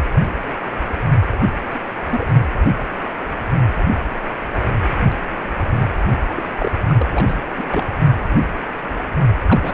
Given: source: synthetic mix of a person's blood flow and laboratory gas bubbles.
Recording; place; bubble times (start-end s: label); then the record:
Doppler ultrasound of blood flow; precordium
0.00-0.02 s: bubbles
1.39-1.47 s: bubbles
1.70-1.80 s: bubbles
2.09-2.26 s: bubbles
5.73-5.91 s: bubbles
6.34-6.71 s: bubbles
6.89-6.94 s: bubbles
6.98-7.08 s: bubbles
7.10-7.40 s: bubbles
7.58-7.65 s: bubbles
7.67-7.88 s: bubbles
9.46-9.74 s: bubbles
From the record:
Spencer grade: 2 (many but less than half of the cardiac periods contain bubble signals, singularly or in groups); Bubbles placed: anywhere in the cardiac cycle